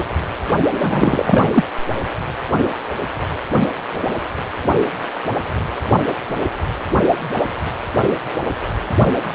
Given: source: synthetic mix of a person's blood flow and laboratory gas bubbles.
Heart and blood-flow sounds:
Doppler ultrasound of blood flow; precordium
0.81-1.50 s: bubbles
1.52-1.64 s: bubbles
From the record:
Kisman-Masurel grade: 223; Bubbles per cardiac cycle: several, 3 to 8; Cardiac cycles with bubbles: 10 to 50%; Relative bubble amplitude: loud (0.450 to 0.775); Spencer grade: 2 (many but less than half of the cardiac periods contain bubble signals, singularly or in groups); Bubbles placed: only in the low amplitude regions of the cardiac cycle

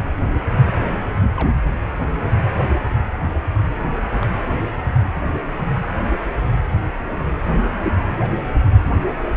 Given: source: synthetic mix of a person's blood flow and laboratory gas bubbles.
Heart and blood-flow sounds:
Doppler ultrasound of blood flow; precordium
0.63-0.67 s: bubbles
1.36-1.54 s: bubbles
4.21-4.24 s: bubbles
5.07-5.28 s: bubbles
8.16-8.31 s: bubbles
8.65-8.70 s: bubbles
From the record:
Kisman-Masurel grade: 121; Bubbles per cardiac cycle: 1 to 2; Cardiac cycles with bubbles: 10 to 50%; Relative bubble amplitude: barely perceptible (0.100 to 0.250); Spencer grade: 2 (many but less than half of the cardiac periods contain bubble signals, singularly or in groups); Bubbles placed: anywhere in the cardiac cycle

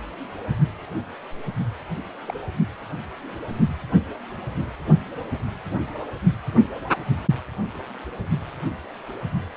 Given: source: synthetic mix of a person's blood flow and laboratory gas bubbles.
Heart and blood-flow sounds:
Doppler ultrasound of blood flow; precordium
2.25-2.33 s: bubbles
From the record:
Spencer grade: 1 (occasional bubble signal discernible with the cardiac motion signal, with majority of cardiac periods free of bubbles); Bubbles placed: anywhere in the cardiac cycle

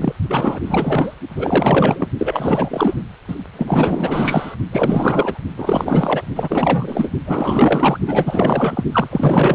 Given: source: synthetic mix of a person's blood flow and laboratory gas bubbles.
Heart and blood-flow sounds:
Doppler ultrasound of blood flow; precordium
0.00-0.13 s: bubbles
0.28-0.59 s: bubbles
0.64-1.14 s: bubbles
1.30-2.08 s: bubbles
2.18-2.95 s: bubbles
3.28-3.35 s: bubbles
3.53-4.56 s: bubbles
4.71-5.38 s: bubbles
5.56-6.25 s: bubbles
6.34-7.10 s: bubbles
7.25-7.99 s: bubbles
8.07-8.84 s: bubbles
8.92-9.55 s: bubbles
From the record:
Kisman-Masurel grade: 444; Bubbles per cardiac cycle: continuous sound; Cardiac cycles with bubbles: 100%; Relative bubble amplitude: maximal (0.775 to 0.999); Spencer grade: 4 (maximum detectable bubble signal sounding continuously throughout systole and diastole of every cardiac period, and overriding the amplitude of the normal cardiac signals); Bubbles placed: only in the low amplitude regions of the cardiac cycle

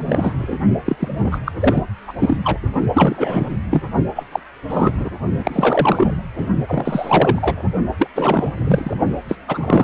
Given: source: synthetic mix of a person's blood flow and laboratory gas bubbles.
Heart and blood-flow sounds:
Doppler ultrasound of blood flow; precordium
0.00-0.34 s: bubbles
0.38-0.58 s: bubbles
0.84-0.96 s: bubbles
0.99-1.08 s: bubbles
1.23-1.39 s: bubbles
1.45-1.52 s: bubbles
1.59-1.84 s: bubbles
2.08-2.13 s: bubbles
2.19-2.37 s: bubbles
2.44-2.57 s: bubbles
2.94-3.57 s: bubbles
3.70-3.81 s: bubbles
4.16-4.24 s: bubbles
4.32-4.40 s: bubbles
4.69-4.93 s: bubbles
4.98-5.11 s: bubbles
5.39-6.22 s: bubbles
6.37-6.46 s: bubbles
6.67-7.64 s: bubbles
7.99-8.09 s: bubbles
8.16-8.96 s: bubbles
9.29-9.36 s: bubbles
9.48-9.84 s: bubbles
From the record:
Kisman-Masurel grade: 342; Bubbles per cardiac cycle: rolling drumbeat, 9 or more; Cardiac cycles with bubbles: 100%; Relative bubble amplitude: moderate (0.250 to 0.450); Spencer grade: 3 (all of the cardiac periods contain showers or single bubble signals, but not dominating or overriding the cardiac motion signals); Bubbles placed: only in the low amplitude regions of the cardiac cycle

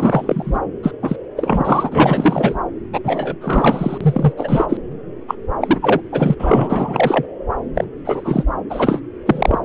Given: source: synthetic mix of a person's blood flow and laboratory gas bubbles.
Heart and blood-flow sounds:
Doppler ultrasound of blood flow; subclavian vein
0.00-0.60 s: bubbles
0.83-0.92 s: bubbles
1.02-1.16 s: bubbles
1.36-2.57 s: bubbles
2.93-3.00 s: bubbles
3.04-3.35 s: bubbles
3.40-3.98 s: bubbles
4.00-4.33 s: bubbles
4.37-4.77 s: bubbles
5.28-5.35 s: bubbles
5.60-6.00 s: bubbles
6.12-6.35 s: bubbles
6.39-7.25 s: bubbles
7.75-7.84 s: bubbles
8.04-8.44 s: bubbles
8.70-8.99 s: bubbles
9.26-9.58 s: bubbles
From the record:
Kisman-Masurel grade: 343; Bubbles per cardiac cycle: rolling drumbeat, 9 or more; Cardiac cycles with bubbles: 100%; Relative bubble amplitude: loud (0.450 to 0.775); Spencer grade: 3 (all of the cardiac periods contain showers or single bubble signals, but not dominating or overriding the cardiac motion signals); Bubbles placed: anywhere in the cardiac cycle

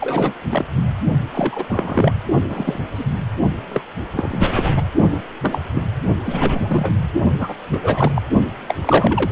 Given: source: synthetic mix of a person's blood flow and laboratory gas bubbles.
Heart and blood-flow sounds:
Doppler ultrasound of blood flow; precordium
0.00-0.34 s: bubbles
0.49-0.65 s: bubbles
1.33-1.65 s: bubbles
1.67-2.12 s: bubbles
2.48-2.79 s: bubbles
2.94-3.05 s: bubbles
3.69-3.83 s: bubbles
4.12-4.81 s: bubbles
5.41-5.62 s: bubbles
5.73-5.87 s: bubbles
6.25-6.98 s: bubbles
7.38-7.54 s: bubbles
7.71-8.12 s: bubbles
8.14-8.22 s: bubbles
8.68-8.74 s: bubbles
8.81-9.32 s: bubbles
From the record:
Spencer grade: 3 (all of the cardiac periods contain showers or single bubble signals, but not dominating or overriding the cardiac motion signals); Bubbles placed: only in the low amplitude regions of the cardiac cycle

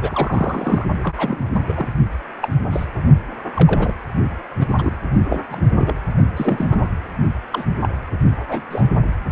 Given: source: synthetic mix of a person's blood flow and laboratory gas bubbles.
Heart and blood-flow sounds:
Doppler ultrasound of blood flow; precordium
0.01-0.86 s: bubbles
1.03-1.14 s: bubbles
1.17-1.88 s: bubbles
2.40-2.48 s: bubbles
2.70-2.85 s: bubbles
3.53-3.95 s: bubbles
4.59-4.96 s: bubbles
5.29-5.43 s: bubbles
5.50-5.61 s: bubbles
5.78-5.93 s: bubbles
6.36-6.67 s: bubbles
6.70-6.89 s: bubbles
7.52-7.66 s: bubbles
7.83-7.89 s: bubbles
8.49-8.62 s: bubbles
8.69-8.87 s: bubbles
From the record:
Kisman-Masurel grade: 242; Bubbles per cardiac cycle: several, 3 to 8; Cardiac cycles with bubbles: 100%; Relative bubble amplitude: moderate (0.250 to 0.450); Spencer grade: 3 (all of the cardiac periods contain showers or single bubble signals, but not dominating or overriding the cardiac motion signals); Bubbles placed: only in the low amplitude regions of the cardiac cycle

